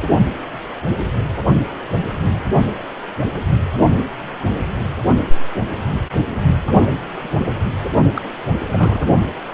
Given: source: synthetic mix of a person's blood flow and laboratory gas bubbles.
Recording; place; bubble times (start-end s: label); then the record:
Doppler ultrasound of blood flow; precordium
8.15-8.22 s: bubbles
8.71-9.06 s: bubbles
From the record:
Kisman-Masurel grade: 211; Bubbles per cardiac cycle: several, 3 to 8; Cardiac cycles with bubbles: 1 to 10%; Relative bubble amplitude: barely perceptible (0.100 to 0.250); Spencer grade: 1 (occasional bubble signal discernible with the cardiac motion signal, with majority of cardiac periods free of bubbles); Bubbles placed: only in the low amplitude regions of the cardiac cycle